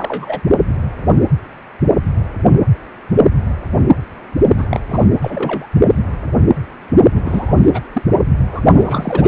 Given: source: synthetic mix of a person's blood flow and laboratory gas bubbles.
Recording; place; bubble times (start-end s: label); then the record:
Doppler ultrasound of blood flow; precordium
0.00-0.41 s: bubbles
4.57-4.80 s: bubbles
4.89-5.08 s: bubbles
5.21-5.67 s: bubbles
7.14-7.80 s: bubbles
7.93-8.03 s: bubbles
8.12-8.17 s: bubbles
8.52-8.61 s: bubbles
8.67-9.28 s: bubbles
From the record:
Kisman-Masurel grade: 332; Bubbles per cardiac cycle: rolling drumbeat, 9 or more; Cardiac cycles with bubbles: 50 to 99%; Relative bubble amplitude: moderate (0.250 to 0.450); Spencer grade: 3 (all of the cardiac periods contain showers or single bubble signals, but not dominating or overriding the cardiac motion signals); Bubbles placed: only in the low amplitude regions of the cardiac cycle